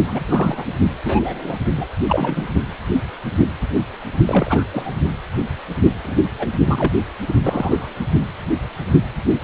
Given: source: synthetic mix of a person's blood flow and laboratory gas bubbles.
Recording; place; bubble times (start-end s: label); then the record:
Doppler ultrasound of blood flow; precordium
0.08-0.21 s: bubbles
0.28-0.64 s: bubbles
1.05-1.55 s: bubbles
1.77-1.88 s: bubbles
2.07-2.45 s: bubbles
4.27-4.67 s: bubbles
4.72-4.99 s: bubbles
6.04-6.25 s: bubbles
6.39-6.48 s: bubbles
6.65-6.93 s: bubbles
7.26-7.35 s: bubbles
7.43-7.93 s: bubbles
From the record:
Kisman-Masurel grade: 232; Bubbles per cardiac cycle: several, 3 to 8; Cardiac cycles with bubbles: 50 to 99%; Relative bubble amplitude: moderate (0.250 to 0.450); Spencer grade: 3 (all of the cardiac periods contain showers or single bubble signals, but not dominating or overriding the cardiac motion signals); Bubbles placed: only in the low amplitude regions of the cardiac cycle